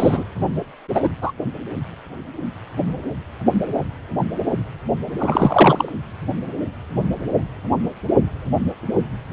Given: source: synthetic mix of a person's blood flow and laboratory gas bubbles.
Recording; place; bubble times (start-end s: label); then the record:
Doppler ultrasound of blood flow; precordium
0.00-0.24 s: bubbles
0.94-1.09 s: bubbles
1.21-1.32 s: bubbles
5.18-5.89 s: bubbles
From the record:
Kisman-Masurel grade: 223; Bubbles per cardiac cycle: several, 3 to 8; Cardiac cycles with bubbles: 10 to 50%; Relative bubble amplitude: loud (0.450 to 0.775); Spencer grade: 2 (many but less than half of the cardiac periods contain bubble signals, singularly or in groups); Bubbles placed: anywhere in the cardiac cycle